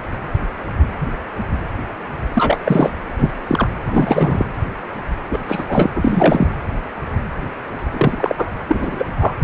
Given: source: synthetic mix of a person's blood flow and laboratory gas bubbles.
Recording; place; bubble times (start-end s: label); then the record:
Doppler ultrasound of blood flow; precordium
2.35-2.95 s: bubbles
3.18-3.31 s: bubbles
3.48-3.68 s: bubbles
3.85-4.44 s: bubbles
5.31-5.39 s: bubbles
5.48-5.90 s: bubbles
5.95-6.47 s: bubbles
7.93-8.35 s: bubbles
8.38-8.46 s: bubbles
8.67-9.04 s: bubbles
9.19-9.35 s: bubbles
From the record:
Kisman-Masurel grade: 223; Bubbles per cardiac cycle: several, 3 to 8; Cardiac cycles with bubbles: 10 to 50%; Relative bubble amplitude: loud (0.450 to 0.775); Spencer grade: 2 (many but less than half of the cardiac periods contain bubble signals, singularly or in groups); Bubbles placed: anywhere in the cardiac cycle